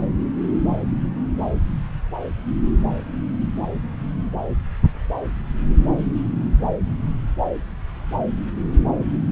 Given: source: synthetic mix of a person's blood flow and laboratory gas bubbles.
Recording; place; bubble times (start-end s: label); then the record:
Doppler ultrasound of blood flow; subclavian vein
no bubbles
From the record:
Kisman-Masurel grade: 000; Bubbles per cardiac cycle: 0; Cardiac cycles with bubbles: 0%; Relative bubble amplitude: no bubbles discernible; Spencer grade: 0 (complete lack of bubble signals)